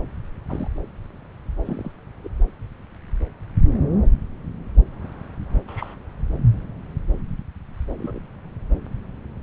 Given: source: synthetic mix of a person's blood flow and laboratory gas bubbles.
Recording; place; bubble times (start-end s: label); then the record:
Doppler ultrasound of blood flow; subclavian vein
0.49-0.68 s: bubbles
1.65-1.92 s: bubbles
2.23-2.30 s: bubbles
5.67-5.95 s: bubbles
7.98-8.18 s: bubbles
From the record:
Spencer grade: 2 (many but less than half of the cardiac periods contain bubble signals, singularly or in groups); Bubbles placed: anywhere in the cardiac cycle